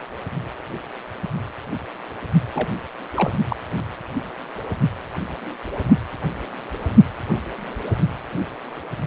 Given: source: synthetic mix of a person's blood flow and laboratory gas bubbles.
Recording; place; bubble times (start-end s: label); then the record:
Doppler ultrasound of blood flow; precordium
2.55-2.68 s: bubbles
3.15-3.30 s: bubbles
3.50-3.56 s: bubbles
From the record:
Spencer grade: 1 (occasional bubble signal discernible with the cardiac motion signal, with majority of cardiac periods free of bubbles); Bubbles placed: only in the low amplitude regions of the cardiac cycle